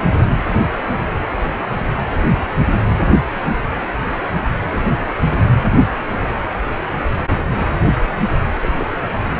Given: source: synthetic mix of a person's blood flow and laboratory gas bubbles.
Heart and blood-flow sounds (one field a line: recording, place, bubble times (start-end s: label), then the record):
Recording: Doppler ultrasound of blood flow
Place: precordium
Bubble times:
8.62-8.89 s: bubbles
From the record:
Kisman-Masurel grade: 111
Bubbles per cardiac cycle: 1 to 2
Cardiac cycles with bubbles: 1 to 10%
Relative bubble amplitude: barely perceptible (0.100 to 0.250)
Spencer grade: 1 (occasional bubble signal discernible with the cardiac motion signal, with majority of cardiac periods free of bubbles)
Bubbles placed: anywhere in the cardiac cycle